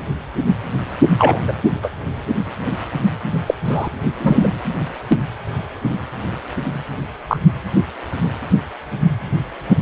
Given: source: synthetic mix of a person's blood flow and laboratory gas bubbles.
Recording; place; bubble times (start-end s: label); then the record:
Doppler ultrasound of blood flow; precordium
1.18-1.40 s: bubbles
1.47-1.52 s: bubbles
1.82-1.89 s: bubbles
3.46-3.54 s: bubbles
3.64-3.88 s: bubbles
4.19-4.47 s: bubbles
7.28-7.37 s: bubbles
From the record:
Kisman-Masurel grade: 123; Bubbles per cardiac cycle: 1 to 2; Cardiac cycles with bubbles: 10 to 50%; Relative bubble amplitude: loud (0.450 to 0.775); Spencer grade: 2 (many but less than half of the cardiac periods contain bubble signals, singularly or in groups); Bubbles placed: anywhere in the cardiac cycle